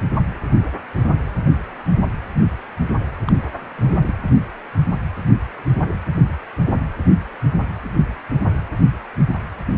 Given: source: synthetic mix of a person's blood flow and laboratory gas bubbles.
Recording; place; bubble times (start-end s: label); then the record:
Doppler ultrasound of blood flow; precordium
3.25-3.32 s: bubbles
3.77-4.12 s: bubbles
From the record:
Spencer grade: 1 (occasional bubble signal discernible with the cardiac motion signal, with majority of cardiac periods free of bubbles); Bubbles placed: anywhere in the cardiac cycle